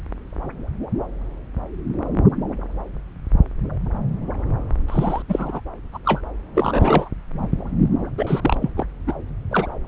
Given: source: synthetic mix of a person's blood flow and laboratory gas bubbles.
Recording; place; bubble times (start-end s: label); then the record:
Doppler ultrasound of blood flow; subclavian vein
4.88-5.22 s: bubbles
5.28-5.61 s: bubbles
5.92-5.98 s: bubbles
6.05-6.21 s: bubbles
6.54-7.09 s: bubbles
8.18-8.71 s: bubbles
8.77-8.86 s: bubbles
9.06-9.13 s: bubbles
9.51-9.66 s: bubbles
From the record:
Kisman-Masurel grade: 232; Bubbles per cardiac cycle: several, 3 to 8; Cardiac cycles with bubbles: 50 to 99%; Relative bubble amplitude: moderate (0.250 to 0.450); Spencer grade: 3 (all of the cardiac periods contain showers or single bubble signals, but not dominating or overriding the cardiac motion signals); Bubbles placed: anywhere in the cardiac cycle